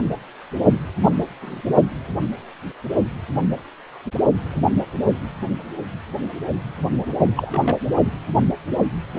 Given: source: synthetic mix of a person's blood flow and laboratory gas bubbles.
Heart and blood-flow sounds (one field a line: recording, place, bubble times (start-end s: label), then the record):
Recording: Doppler ultrasound of blood flow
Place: precordium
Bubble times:
1.01-1.11 s: bubbles
1.42-1.61 s: bubbles
7.36-7.79 s: bubbles
From the record:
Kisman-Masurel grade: 122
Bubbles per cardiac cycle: 1 to 2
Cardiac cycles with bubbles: 10 to 50%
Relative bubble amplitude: moderate (0.250 to 0.450)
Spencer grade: 2 (many but less than half of the cardiac periods contain bubble signals, singularly or in groups)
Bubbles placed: only in the low amplitude regions of the cardiac cycle